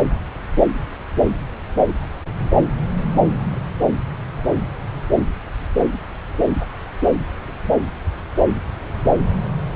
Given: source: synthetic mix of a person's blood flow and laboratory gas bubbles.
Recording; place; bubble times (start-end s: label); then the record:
Doppler ultrasound of blood flow; subclavian vein
no bubbles
From the record:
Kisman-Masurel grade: 000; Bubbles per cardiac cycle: 0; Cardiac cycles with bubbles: 0%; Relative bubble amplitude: no bubbles discernible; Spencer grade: 0 (complete lack of bubble signals)